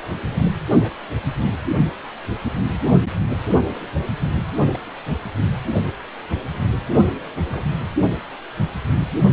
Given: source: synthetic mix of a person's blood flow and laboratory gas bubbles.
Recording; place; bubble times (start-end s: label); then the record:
Doppler ultrasound of blood flow; precordium
0.81-0.94 s: bubbles
4.56-4.60 s: bubbles
4.67-4.79 s: bubbles
6.29-6.37 s: bubbles
7.02-7.07 s: bubbles
7.49-7.89 s: bubbles
From the record:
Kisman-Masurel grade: 121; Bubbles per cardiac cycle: 1 to 2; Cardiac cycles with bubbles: 10 to 50%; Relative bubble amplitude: barely perceptible (0.100 to 0.250); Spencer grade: 2 (many but less than half of the cardiac periods contain bubble signals, singularly or in groups); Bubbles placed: anywhere in the cardiac cycle